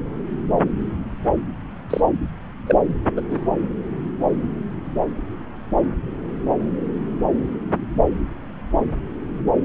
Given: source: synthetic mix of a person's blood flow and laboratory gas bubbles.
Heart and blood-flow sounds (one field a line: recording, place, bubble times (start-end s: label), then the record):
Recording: Doppler ultrasound of blood flow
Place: subclavian vein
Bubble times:
1.90-2.00 s: bubbles
2.66-2.75 s: bubbles
3.17-3.21 s: bubbles
3.31-3.50 s: bubbles
From the record:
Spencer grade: 2 (many but less than half of the cardiac periods contain bubble signals, singularly or in groups)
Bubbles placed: anywhere in the cardiac cycle